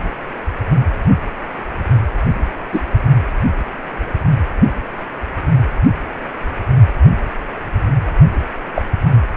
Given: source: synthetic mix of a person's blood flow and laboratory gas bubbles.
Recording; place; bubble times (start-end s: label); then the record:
Doppler ultrasound of blood flow; precordium
1.08-1.16 s: bubbles
2.72-2.81 s: bubbles
8.75-8.83 s: bubbles
From the record:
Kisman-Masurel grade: 123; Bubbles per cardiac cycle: 1 to 2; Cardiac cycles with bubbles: 10 to 50%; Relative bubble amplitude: loud (0.450 to 0.775); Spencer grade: 2 (many but less than half of the cardiac periods contain bubble signals, singularly or in groups); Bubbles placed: anywhere in the cardiac cycle